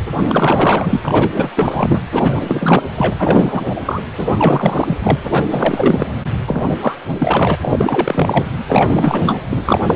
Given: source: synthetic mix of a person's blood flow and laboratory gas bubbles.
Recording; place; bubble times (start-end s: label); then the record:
Doppler ultrasound of blood flow; precordium
0.18-1.00 s: bubbles
1.04-1.49 s: bubbles
1.56-2.01 s: bubbles
2.12-2.83 s: bubbles
2.95-3.14 s: bubbles
3.17-4.02 s: bubbles
4.18-4.97 s: bubbles
5.03-5.17 s: bubbles
5.32-5.45 s: bubbles
5.50-6.13 s: bubbles
6.47-6.76 s: bubbles
6.81-6.95 s: bubbles
7.10-7.56 s: bubbles
7.62-8.51 s: bubbles
8.68-9.42 s: bubbles
9.52-9.62 s: bubbles
9.64-9.96 s: bubbles
From the record:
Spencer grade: 4 (maximum detectable bubble signal sounding continuously throughout systole and diastole of every cardiac period, and overriding the amplitude of the normal cardiac signals); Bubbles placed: anywhere in the cardiac cycle